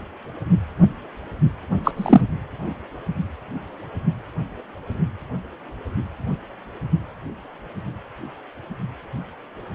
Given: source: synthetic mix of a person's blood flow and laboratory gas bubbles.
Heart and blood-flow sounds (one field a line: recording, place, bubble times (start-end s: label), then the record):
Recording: Doppler ultrasound of blood flow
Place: precordium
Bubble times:
1.84-1.91 s: bubbles
1.96-2.21 s: bubbles
From the record:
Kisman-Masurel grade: 113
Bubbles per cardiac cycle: 1 to 2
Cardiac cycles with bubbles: 1 to 10%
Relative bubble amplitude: loud (0.450 to 0.775)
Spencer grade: 1 (occasional bubble signal discernible with the cardiac motion signal, with majority of cardiac periods free of bubbles)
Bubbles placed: only in the low amplitude regions of the cardiac cycle